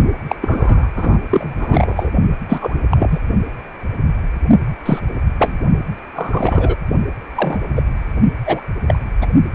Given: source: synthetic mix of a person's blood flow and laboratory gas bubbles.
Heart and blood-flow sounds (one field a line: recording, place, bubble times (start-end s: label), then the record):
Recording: Doppler ultrasound of blood flow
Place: precordium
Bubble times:
0.28-0.35 s: bubbles
0.41-0.88 s: bubbles
0.96-1.19 s: bubbles
1.31-1.56 s: bubbles
1.59-2.11 s: bubbles
2.48-2.75 s: bubbles
2.90-3.20 s: bubbles
4.85-4.99 s: bubbles
5.38-5.58 s: bubbles
6.15-6.75 s: bubbles
7.34-7.59 s: bubbles
7.75-7.83 s: bubbles
8.46-8.61 s: bubbles
8.88-9.01 s: bubbles
9.21-9.26 s: bubbles
From the record:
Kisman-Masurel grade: 233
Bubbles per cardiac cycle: several, 3 to 8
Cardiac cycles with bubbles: 50 to 99%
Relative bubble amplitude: loud (0.450 to 0.775)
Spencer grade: 3 (all of the cardiac periods contain showers or single bubble signals, but not dominating or overriding the cardiac motion signals)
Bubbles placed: only in the low amplitude regions of the cardiac cycle